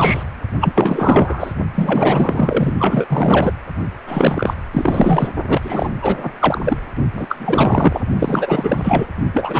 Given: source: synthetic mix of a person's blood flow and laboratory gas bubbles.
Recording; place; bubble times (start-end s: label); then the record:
Doppler ultrasound of blood flow; precordium
0.00-0.23 s: bubbles
0.60-1.53 s: bubbles
1.74-2.73 s: bubbles
2.79-3.52 s: bubbles
4.07-4.54 s: bubbles
4.72-5.30 s: bubbles
5.48-5.92 s: bubbles
6.02-6.30 s: bubbles
6.38-6.77 s: bubbles
7.14-7.26 s: bubbles
7.29-8.01 s: bubbles
8.19-9.08 s: bubbles
9.33-9.60 s: bubbles
From the record:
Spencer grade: 4 (maximum detectable bubble signal sounding continuously throughout systole and diastole of every cardiac period, and overriding the amplitude of the normal cardiac signals); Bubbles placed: only in the low amplitude regions of the cardiac cycle